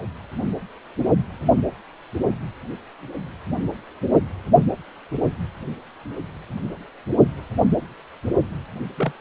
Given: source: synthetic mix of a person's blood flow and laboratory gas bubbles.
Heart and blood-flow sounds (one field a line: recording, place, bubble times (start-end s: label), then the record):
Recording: Doppler ultrasound of blood flow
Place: precordium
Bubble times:
8.97-9.12 s: bubbles
From the record:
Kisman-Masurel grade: 122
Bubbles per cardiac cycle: 1 to 2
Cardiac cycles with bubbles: 10 to 50%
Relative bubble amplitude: moderate (0.250 to 0.450)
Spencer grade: 2 (many but less than half of the cardiac periods contain bubble signals, singularly or in groups)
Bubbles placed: only in the low amplitude regions of the cardiac cycle